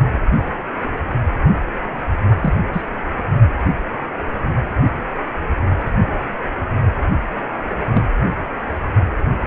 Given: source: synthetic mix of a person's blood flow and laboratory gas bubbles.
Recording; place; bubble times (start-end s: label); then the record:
Doppler ultrasound of blood flow; precordium
2.41-2.54 s: bubbles
2.73-2.82 s: bubbles
7.93-8.04 s: bubbles
From the record:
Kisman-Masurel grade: 122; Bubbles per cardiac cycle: 1 to 2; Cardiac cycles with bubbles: 10 to 50%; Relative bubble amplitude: moderate (0.250 to 0.450); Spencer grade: 2 (many but less than half of the cardiac periods contain bubble signals, singularly or in groups); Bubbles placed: anywhere in the cardiac cycle